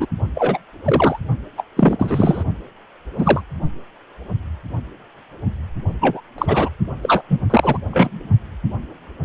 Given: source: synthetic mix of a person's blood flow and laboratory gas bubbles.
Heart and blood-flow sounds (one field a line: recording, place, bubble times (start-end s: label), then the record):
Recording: Doppler ultrasound of blood flow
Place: precordium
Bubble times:
0.00-0.06 s: bubbles
0.35-0.58 s: bubbles
0.84-1.19 s: bubbles
1.57-1.63 s: bubbles
1.77-2.44 s: bubbles
3.18-3.41 s: bubbles
6.00-6.21 s: bubbles
6.38-6.69 s: bubbles
7.02-7.22 s: bubbles
7.29-7.40 s: bubbles
7.49-7.78 s: bubbles
7.90-8.29 s: bubbles
From the record:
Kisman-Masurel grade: 233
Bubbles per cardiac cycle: several, 3 to 8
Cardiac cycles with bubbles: 50 to 99%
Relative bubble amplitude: loud (0.450 to 0.775)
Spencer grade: 3 (all of the cardiac periods contain showers or single bubble signals, but not dominating or overriding the cardiac motion signals)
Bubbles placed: only in the low amplitude regions of the cardiac cycle